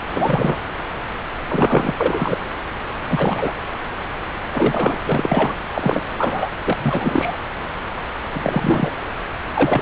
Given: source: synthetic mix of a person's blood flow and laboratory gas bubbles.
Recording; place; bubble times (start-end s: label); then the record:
Doppler ultrasound of blood flow; subclavian vein
0.11-0.60 s: bubbles
1.47-1.94 s: bubbles
1.98-2.38 s: bubbles
3.10-3.52 s: bubbles
4.53-4.99 s: bubbles
5.06-5.54 s: bubbles
5.75-6.02 s: bubbles
6.09-6.49 s: bubbles
6.65-7.36 s: bubbles
8.32-8.91 s: bubbles
9.54-9.82 s: bubbles
From the record:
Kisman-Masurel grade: 333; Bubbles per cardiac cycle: rolling drumbeat, 9 or more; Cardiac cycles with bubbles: 50 to 99%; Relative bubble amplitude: loud (0.450 to 0.775); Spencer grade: 3 (all of the cardiac periods contain showers or single bubble signals, but not dominating or overriding the cardiac motion signals); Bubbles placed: anywhere in the cardiac cycle